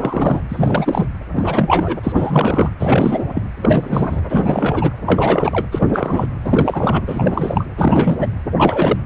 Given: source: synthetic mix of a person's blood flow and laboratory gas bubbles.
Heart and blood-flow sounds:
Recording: Doppler ultrasound of blood flow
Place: precordium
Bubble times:
0.00-0.40 s: bubbles
0.49-1.06 s: bubbles
1.35-1.99 s: bubbles
2.03-2.12 s: bubbles
2.15-2.70 s: bubbles
2.79-3.24 s: bubbles
3.28-3.42 s: bubbles
3.62-4.21 s: bubbles
4.29-4.93 s: bubbles
5.06-5.67 s: bubbles
5.71-6.26 s: bubbles
6.43-7.01 s: bubbles
7.07-7.66 s: bubbles
7.78-8.27 s: bubbles
8.57-8.98 s: bubbles
From the record:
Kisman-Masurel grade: 343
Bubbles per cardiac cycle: rolling drumbeat, 9 or more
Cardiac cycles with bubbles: 100%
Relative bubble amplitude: loud (0.450 to 0.775)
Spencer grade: 3 (all of the cardiac periods contain showers or single bubble signals, but not dominating or overriding the cardiac motion signals)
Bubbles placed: anywhere in the cardiac cycle

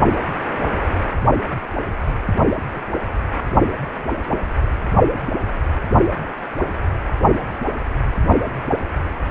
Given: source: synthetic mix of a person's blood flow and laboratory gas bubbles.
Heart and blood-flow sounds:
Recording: Doppler ultrasound of blood flow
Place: precordium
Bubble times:
2.72-2.83 s: bubbles
From the record:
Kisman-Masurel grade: 111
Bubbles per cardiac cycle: 1 to 2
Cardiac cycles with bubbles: 1 to 10%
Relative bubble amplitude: barely perceptible (0.100 to 0.250)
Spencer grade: 1 (occasional bubble signal discernible with the cardiac motion signal, with majority of cardiac periods free of bubbles)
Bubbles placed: only in the low amplitude regions of the cardiac cycle

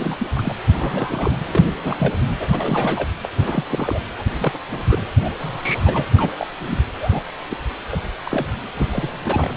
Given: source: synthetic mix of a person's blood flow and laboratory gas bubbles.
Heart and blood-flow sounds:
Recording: Doppler ultrasound of blood flow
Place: precordium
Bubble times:
0.00-0.16 s: bubbles
0.19-0.29 s: bubbles
0.35-0.54 s: bubbles
0.71-1.37 s: bubbles
1.47-1.66 s: bubbles
1.83-2.12 s: bubbles
2.39-2.48 s: bubbles
2.52-3.10 s: bubbles
3.23-3.29 s: bubbles
3.35-3.64 s: bubbles
3.69-3.99 s: bubbles
4.18-4.23 s: bubbles
4.38-4.53 s: bubbles
4.70-5.01 s: bubbles
5.22-5.30 s: bubbles
5.40-6.05 s: bubbles
6.17-6.34 s: bubbles
6.37-6.47 s: bubbles
6.67-6.78 s: bubbles
6.94-7.22 s: bubbles
7.50-7.57 s: bubbles
7.92-8.00 s: bubbles
8.24-8.46 s: bubbles
8.75-9.50 s: bubbles
From the record:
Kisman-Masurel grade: 242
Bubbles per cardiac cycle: several, 3 to 8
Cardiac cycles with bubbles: 100%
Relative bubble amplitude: moderate (0.250 to 0.450)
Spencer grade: 3 (all of the cardiac periods contain showers or single bubble signals, but not dominating or overriding the cardiac motion signals)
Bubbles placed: anywhere in the cardiac cycle

